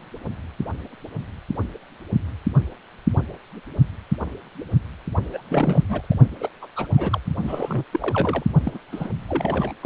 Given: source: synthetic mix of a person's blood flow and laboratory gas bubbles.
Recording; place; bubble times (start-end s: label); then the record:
Doppler ultrasound of blood flow; precordium
5.33-5.42 s: bubbles
5.49-5.84 s: bubbles
5.88-6.06 s: bubbles
6.10-6.15 s: bubbles
6.40-6.50 s: bubbles
6.62-6.67 s: bubbles
6.76-6.87 s: bubbles
6.92-7.21 s: bubbles
7.42-7.84 s: bubbles
7.92-8.43 s: bubbles
8.63-8.79 s: bubbles
8.91-9.10 s: bubbles
9.29-9.72 s: bubbles
9.82-9.86 s: bubbles
From the record:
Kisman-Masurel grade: 222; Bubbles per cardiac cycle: several, 3 to 8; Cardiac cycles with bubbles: 10 to 50%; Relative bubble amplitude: moderate (0.250 to 0.450); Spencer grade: 2 (many but less than half of the cardiac periods contain bubble signals, singularly or in groups); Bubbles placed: only in the low amplitude regions of the cardiac cycle